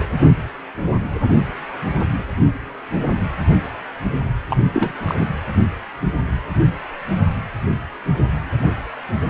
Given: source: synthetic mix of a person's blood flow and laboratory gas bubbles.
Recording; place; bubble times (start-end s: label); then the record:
Doppler ultrasound of blood flow; precordium
4.50-4.57 s: bubbles
4.73-4.92 s: bubbles
5.06-5.15 s: bubbles
5.19-5.27 s: bubbles
From the record:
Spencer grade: 1 (occasional bubble signal discernible with the cardiac motion signal, with majority of cardiac periods free of bubbles); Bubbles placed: anywhere in the cardiac cycle